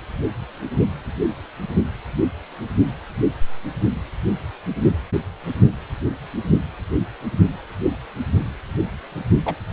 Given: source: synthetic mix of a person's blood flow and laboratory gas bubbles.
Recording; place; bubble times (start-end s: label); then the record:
Doppler ultrasound of blood flow; precordium
9.45-9.55 s: bubbles
From the record:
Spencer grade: 2 (many but less than half of the cardiac periods contain bubble signals, singularly or in groups); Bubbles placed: only in the low amplitude regions of the cardiac cycle